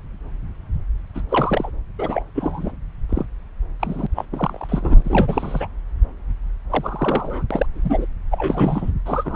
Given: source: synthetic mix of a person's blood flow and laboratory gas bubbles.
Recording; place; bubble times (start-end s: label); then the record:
Doppler ultrasound of blood flow; subclavian vein
1.15-1.21 s: bubbles
1.29-1.70 s: bubbles
1.99-2.23 s: bubbles
2.35-2.72 s: bubbles
3.09-3.26 s: bubbles
3.79-4.07 s: bubbles
4.15-4.25 s: bubbles
4.32-5.67 s: bubbles
6.70-7.42 s: bubbles
7.50-7.66 s: bubbles
7.73-8.06 s: bubbles
8.31-8.91 s: bubbles
9.05-9.36 s: bubbles
From the record:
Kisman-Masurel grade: 232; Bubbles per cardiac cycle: several, 3 to 8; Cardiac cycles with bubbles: 50 to 99%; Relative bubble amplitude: moderate (0.250 to 0.450); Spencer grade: 3 (all of the cardiac periods contain showers or single bubble signals, but not dominating or overriding the cardiac motion signals); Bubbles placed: anywhere in the cardiac cycle